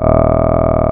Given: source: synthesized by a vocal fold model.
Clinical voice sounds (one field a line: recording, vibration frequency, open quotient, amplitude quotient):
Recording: sustained vowel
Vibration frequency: 40 Hz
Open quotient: 0.3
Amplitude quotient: 1.4